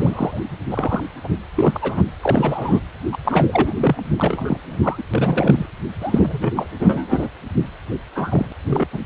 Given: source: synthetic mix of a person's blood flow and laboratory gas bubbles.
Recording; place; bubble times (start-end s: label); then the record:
Doppler ultrasound of blood flow; precordium
0.00-0.40 s: bubbles
0.70-1.04 s: bubbles
1.24-1.29 s: bubbles
1.56-2.04 s: bubbles
2.21-2.80 s: bubbles
3.12-3.17 s: bubbles
3.25-4.02 s: bubbles
4.17-4.58 s: bubbles
4.64-5.03 s: bubbles
5.13-5.66 s: bubbles
6.01-6.52 s: bubbles
6.55-6.67 s: bubbles
6.79-7.29 s: bubbles
8.14-8.52 s: bubbles
8.67-8.86 s: bubbles
8.92-8.99 s: bubbles
From the record:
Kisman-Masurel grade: 242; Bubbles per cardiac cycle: several, 3 to 8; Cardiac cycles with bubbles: 100%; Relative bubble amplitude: moderate (0.250 to 0.450); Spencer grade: 3 (all of the cardiac periods contain showers or single bubble signals, but not dominating or overriding the cardiac motion signals); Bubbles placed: anywhere in the cardiac cycle